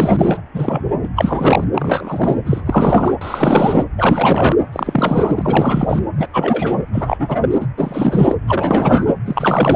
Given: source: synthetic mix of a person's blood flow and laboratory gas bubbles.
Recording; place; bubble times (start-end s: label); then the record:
Doppler ultrasound of blood flow; precordium
0.00-0.41 s: bubbles
0.54-0.82 s: bubbles
1.03-1.08 s: bubbles
1.16-1.64 s: bubbles
1.74-2.36 s: bubbles
2.46-2.61 s: bubbles
2.65-3.14 s: bubbles
3.21-3.84 s: bubbles
3.98-4.56 s: bubbles
4.72-6.00 s: bubbles
6.18-6.27 s: bubbles
6.33-6.83 s: bubbles
6.93-7.37 s: bubbles
7.41-7.67 s: bubbles
7.77-8.35 s: bubbles
8.47-9.13 s: bubbles
9.25-9.76 s: bubbles
From the record:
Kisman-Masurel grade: 343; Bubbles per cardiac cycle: rolling drumbeat, 9 or more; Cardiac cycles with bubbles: 100%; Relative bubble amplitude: loud (0.450 to 0.775); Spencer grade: 3 (all of the cardiac periods contain showers or single bubble signals, but not dominating or overriding the cardiac motion signals); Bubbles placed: anywhere in the cardiac cycle